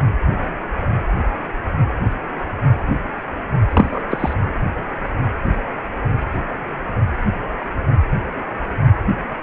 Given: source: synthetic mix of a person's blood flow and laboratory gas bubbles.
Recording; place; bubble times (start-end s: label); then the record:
Doppler ultrasound of blood flow; precordium
3.70-4.02 s: bubbles
4.09-4.33 s: bubbles
From the record:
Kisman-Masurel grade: 213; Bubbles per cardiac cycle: several, 3 to 8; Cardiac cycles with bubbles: 1 to 10%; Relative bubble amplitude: loud (0.450 to 0.775); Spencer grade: 1 (occasional bubble signal discernible with the cardiac motion signal, with majority of cardiac periods free of bubbles); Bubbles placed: anywhere in the cardiac cycle